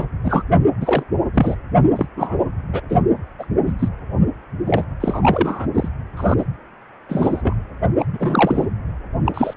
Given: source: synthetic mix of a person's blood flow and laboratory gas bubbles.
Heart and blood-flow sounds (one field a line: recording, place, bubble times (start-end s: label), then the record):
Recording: Doppler ultrasound of blood flow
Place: precordium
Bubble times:
0.00-0.04 s: bubbles
0.22-0.42 s: bubbles
0.80-1.03 s: bubbles
1.33-1.55 s: bubbles
1.95-2.06 s: bubbles
2.16-2.36 s: bubbles
2.73-2.81 s: bubbles
2.89-3.00 s: bubbles
3.38-3.46 s: bubbles
3.67-3.73 s: bubbles
3.79-3.88 s: bubbles
4.67-4.85 s: bubbles
5.00-5.66 s: bubbles
5.75-5.88 s: bubbles
6.17-6.34 s: bubbles
6.38-6.45 s: bubbles
7.08-7.54 s: bubbles
7.99-8.04 s: bubbles
8.12-8.67 s: bubbles
9.25-9.54 s: bubbles
From the record:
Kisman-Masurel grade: 232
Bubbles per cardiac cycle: several, 3 to 8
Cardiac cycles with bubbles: 50 to 99%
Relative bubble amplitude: moderate (0.250 to 0.450)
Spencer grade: 3 (all of the cardiac periods contain showers or single bubble signals, but not dominating or overriding the cardiac motion signals)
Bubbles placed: anywhere in the cardiac cycle